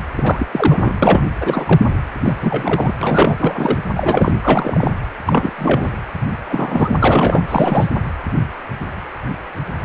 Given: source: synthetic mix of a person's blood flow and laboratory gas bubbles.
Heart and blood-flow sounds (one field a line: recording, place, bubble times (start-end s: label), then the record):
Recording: Doppler ultrasound of blood flow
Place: precordium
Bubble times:
0.15-0.47 s: bubbles
0.52-0.98 s: bubbles
1.02-1.22 s: bubbles
1.41-1.80 s: bubbles
2.23-2.34 s: bubbles
2.40-2.93 s: bubbles
3.01-3.35 s: bubbles
3.38-3.79 s: bubbles
3.94-4.33 s: bubbles
4.44-4.91 s: bubbles
5.25-5.53 s: bubbles
5.58-5.92 s: bubbles
6.47-6.96 s: bubbles
6.99-7.43 s: bubbles
7.48-7.87 s: bubbles
From the record:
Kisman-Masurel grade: 333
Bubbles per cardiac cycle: rolling drumbeat, 9 or more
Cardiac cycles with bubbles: 50 to 99%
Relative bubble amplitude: loud (0.450 to 0.775)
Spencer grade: 3 (all of the cardiac periods contain showers or single bubble signals, but not dominating or overriding the cardiac motion signals)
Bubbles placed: anywhere in the cardiac cycle